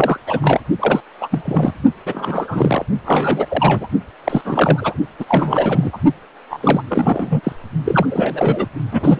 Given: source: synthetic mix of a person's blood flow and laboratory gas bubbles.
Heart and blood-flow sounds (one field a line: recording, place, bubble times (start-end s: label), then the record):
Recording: Doppler ultrasound of blood flow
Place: precordium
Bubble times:
0.00-0.17 s: bubbles
0.27-0.60 s: bubbles
0.79-1.02 s: bubbles
1.21-1.28 s: bubbles
1.31-1.74 s: bubbles
2.05-2.86 s: bubbles
3.04-3.46 s: bubbles
3.49-3.87 s: bubbles
4.24-4.41 s: bubbles
4.45-4.96 s: bubbles
5.19-5.98 s: bubbles
6.50-6.58 s: bubbles
6.61-6.82 s: bubbles
6.88-7.53 s: bubbles
7.84-8.06 s: bubbles
8.09-8.67 s: bubbles
8.91-9.20 s: bubbles
From the record:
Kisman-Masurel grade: 343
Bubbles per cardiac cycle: rolling drumbeat, 9 or more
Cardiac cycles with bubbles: 100%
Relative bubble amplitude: loud (0.450 to 0.775)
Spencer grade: 3 (all of the cardiac periods contain showers or single bubble signals, but not dominating or overriding the cardiac motion signals)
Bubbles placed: only in the low amplitude regions of the cardiac cycle